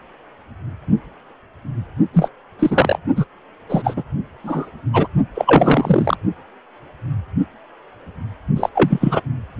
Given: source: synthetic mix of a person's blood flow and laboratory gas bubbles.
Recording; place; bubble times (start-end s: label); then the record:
Doppler ultrasound of blood flow; precordium
2.14-2.29 s: bubbles
2.59-2.98 s: bubbles
3.16-3.25 s: bubbles
3.69-4.03 s: bubbles
4.43-4.69 s: bubbles
4.93-5.07 s: bubbles
5.34-6.16 s: bubbles
8.56-8.69 s: bubbles
8.74-9.21 s: bubbles
From the record:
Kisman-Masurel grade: 233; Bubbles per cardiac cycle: several, 3 to 8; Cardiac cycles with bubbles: 50 to 99%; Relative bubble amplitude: loud (0.450 to 0.775); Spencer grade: 3 (all of the cardiac periods contain showers or single bubble signals, but not dominating or overriding the cardiac motion signals); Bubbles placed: only in the low amplitude regions of the cardiac cycle